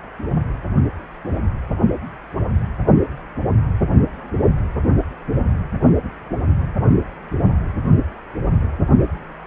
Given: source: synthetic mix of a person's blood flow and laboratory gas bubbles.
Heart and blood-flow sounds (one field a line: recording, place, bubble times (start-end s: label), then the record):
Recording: Doppler ultrasound of blood flow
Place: precordium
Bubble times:
no bubbles
From the record:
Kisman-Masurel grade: 000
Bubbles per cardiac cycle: 0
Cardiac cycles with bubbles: 0%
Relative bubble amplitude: no bubbles discernible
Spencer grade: 0 (complete lack of bubble signals)